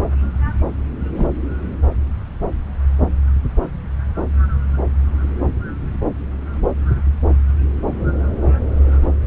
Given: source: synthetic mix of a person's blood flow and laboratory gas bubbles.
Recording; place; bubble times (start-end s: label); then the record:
Doppler ultrasound of blood flow; subclavian vein
1.15-1.26 s: bubbles
From the record:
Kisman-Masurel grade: 112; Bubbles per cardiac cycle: 1 to 2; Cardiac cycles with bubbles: 1 to 10%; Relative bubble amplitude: moderate (0.250 to 0.450); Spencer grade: 1 (occasional bubble signal discernible with the cardiac motion signal, with majority of cardiac periods free of bubbles); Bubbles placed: anywhere in the cardiac cycle